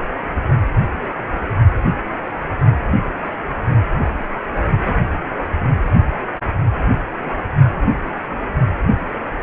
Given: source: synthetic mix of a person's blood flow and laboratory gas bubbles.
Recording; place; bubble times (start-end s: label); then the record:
Doppler ultrasound of blood flow; precordium
4.69-4.94 s: bubbles
From the record:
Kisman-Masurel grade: 112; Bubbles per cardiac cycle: 1 to 2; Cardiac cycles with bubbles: 1 to 10%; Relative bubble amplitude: moderate (0.250 to 0.450); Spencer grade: 1 (occasional bubble signal discernible with the cardiac motion signal, with majority of cardiac periods free of bubbles); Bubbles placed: only in the low amplitude regions of the cardiac cycle